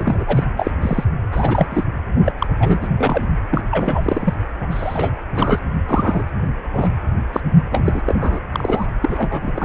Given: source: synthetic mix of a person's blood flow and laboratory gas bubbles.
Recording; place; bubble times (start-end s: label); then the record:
Doppler ultrasound of blood flow; precordium
0.00-0.24 s: bubbles
0.26-0.44 s: bubbles
0.56-0.71 s: bubbles
0.81-1.04 s: bubbles
1.31-1.84 s: bubbles
2.24-2.32 s: bubbles
2.39-2.47 s: bubbles
2.60-2.89 s: bubbles
2.98-3.25 s: bubbles
3.51-3.64 s: bubbles
3.71-4.34 s: bubbles
4.60-4.67 s: bubbles
4.71-5.21 s: bubbles
5.35-5.59 s: bubbles
5.88-6.25 s: bubbles
6.63-7.00 s: bubbles
7.33-7.41 s: bubbles
7.70-8.03 s: bubbles
8.05-8.39 s: bubbles
8.52-8.86 s: bubbles
9.02-9.65 s: bubbles
From the record:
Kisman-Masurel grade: 343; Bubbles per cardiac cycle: rolling drumbeat, 9 or more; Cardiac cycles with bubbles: 100%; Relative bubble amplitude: loud (0.450 to 0.775); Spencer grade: 3 (all of the cardiac periods contain showers or single bubble signals, but not dominating or overriding the cardiac motion signals); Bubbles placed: only in the low amplitude regions of the cardiac cycle